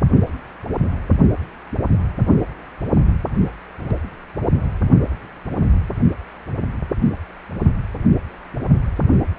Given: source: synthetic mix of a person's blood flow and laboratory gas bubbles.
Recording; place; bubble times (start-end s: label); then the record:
Doppler ultrasound of blood flow; precordium
no bubbles
From the record:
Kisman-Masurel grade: 000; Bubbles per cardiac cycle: 0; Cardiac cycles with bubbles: 0%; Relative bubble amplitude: no bubbles discernible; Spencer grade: 0 (complete lack of bubble signals)